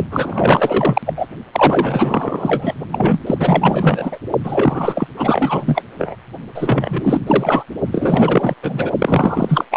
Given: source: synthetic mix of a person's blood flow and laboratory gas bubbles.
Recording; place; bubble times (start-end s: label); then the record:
Doppler ultrasound of blood flow; precordium
0.11-1.02 s: bubbles
1.05-1.14 s: bubbles
1.16-1.27 s: bubbles
1.52-2.74 s: bubbles
2.92-3.19 s: bubbles
3.26-3.35 s: bubbles
3.39-4.19 s: bubbles
4.43-5.07 s: bubbles
5.17-5.83 s: bubbles
5.98-6.16 s: bubbles
6.54-7.20 s: bubbles
7.26-7.63 s: bubbles
7.91-8.54 s: bubbles
8.62-8.90 s: bubbles
8.98-9.65 s: bubbles
9.70-9.77 s: bubbles
From the record:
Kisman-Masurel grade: 444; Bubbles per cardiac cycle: continuous sound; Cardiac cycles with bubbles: 100%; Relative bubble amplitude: maximal (0.775 to 0.999); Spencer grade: 4 (maximum detectable bubble signal sounding continuously throughout systole and diastole of every cardiac period, and overriding the amplitude of the normal cardiac signals); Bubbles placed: only in the low amplitude regions of the cardiac cycle